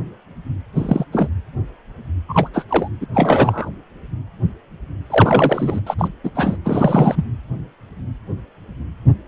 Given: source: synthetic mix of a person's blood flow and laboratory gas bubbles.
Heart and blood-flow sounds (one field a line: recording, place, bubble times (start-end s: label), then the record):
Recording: Doppler ultrasound of blood flow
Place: precordium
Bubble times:
0.75-1.05 s: bubbles
1.12-1.30 s: bubbles
2.28-2.49 s: bubbles
2.53-2.65 s: bubbles
2.69-2.88 s: bubbles
3.00-3.06 s: bubbles
3.14-3.70 s: bubbles
5.10-5.80 s: bubbles
5.87-5.94 s: bubbles
5.98-6.08 s: bubbles
6.23-6.30 s: bubbles
6.34-6.56 s: bubbles
6.64-7.25 s: bubbles
From the record:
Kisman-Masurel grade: 223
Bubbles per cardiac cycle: several, 3 to 8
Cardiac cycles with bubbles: 10 to 50%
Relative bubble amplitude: loud (0.450 to 0.775)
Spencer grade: 2 (many but less than half of the cardiac periods contain bubble signals, singularly or in groups)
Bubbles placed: anywhere in the cardiac cycle